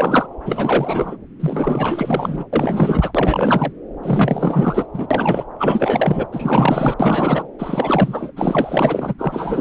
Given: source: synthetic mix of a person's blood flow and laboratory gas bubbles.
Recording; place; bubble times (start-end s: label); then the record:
Doppler ultrasound of blood flow; subclavian vein
0.00-0.27 s: bubbles
0.46-1.18 s: bubbles
1.40-2.45 s: bubbles
2.52-3.72 s: bubbles
4.03-4.87 s: bubbles
4.93-5.07 s: bubbles
5.10-5.44 s: bubbles
5.58-6.25 s: bubbles
6.32-6.94 s: bubbles
7.00-7.47 s: bubbles
7.58-8.31 s: bubbles
8.36-9.14 s: bubbles
9.18-9.61 s: bubbles
From the record:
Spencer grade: 4 (maximum detectable bubble signal sounding continuously throughout systole and diastole of every cardiac period, and overriding the amplitude of the normal cardiac signals); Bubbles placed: anywhere in the cardiac cycle